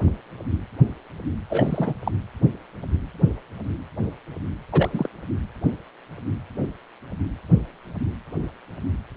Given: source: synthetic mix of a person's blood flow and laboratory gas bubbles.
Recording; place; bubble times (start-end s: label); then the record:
Doppler ultrasound of blood flow; precordium
1.49-1.94 s: bubbles
2.04-2.12 s: bubbles
4.72-5.08 s: bubbles
From the record:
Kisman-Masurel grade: 212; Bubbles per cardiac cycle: several, 3 to 8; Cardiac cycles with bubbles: 1 to 10%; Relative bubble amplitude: moderate (0.250 to 0.450); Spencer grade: 1 (occasional bubble signal discernible with the cardiac motion signal, with majority of cardiac periods free of bubbles); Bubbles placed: anywhere in the cardiac cycle